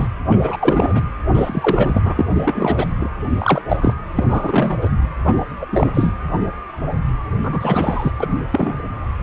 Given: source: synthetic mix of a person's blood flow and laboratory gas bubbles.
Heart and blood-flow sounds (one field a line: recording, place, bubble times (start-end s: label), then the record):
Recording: Doppler ultrasound of blood flow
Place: precordium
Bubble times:
0.00-0.07 s: bubbles
0.30-0.56 s: bubbles
0.59-1.04 s: bubbles
1.33-2.02 s: bubbles
2.04-2.14 s: bubbles
2.17-2.25 s: bubbles
2.30-2.85 s: bubbles
2.96-3.09 s: bubbles
3.38-3.62 s: bubbles
3.68-3.77 s: bubbles
3.80-3.93 s: bubbles
4.15-4.24 s: bubbles
4.28-4.90 s: bubbles
5.25-5.45 s: bubbles
5.59-5.66 s: bubbles
5.71-6.13 s: bubbles
7.43-8.12 s: bubbles
8.20-8.26 s: bubbles
8.50-8.73 s: bubbles
From the record:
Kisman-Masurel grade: 233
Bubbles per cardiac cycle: several, 3 to 8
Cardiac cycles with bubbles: 50 to 99%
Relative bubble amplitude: loud (0.450 to 0.775)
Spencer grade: 3 (all of the cardiac periods contain showers or single bubble signals, but not dominating or overriding the cardiac motion signals)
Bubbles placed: anywhere in the cardiac cycle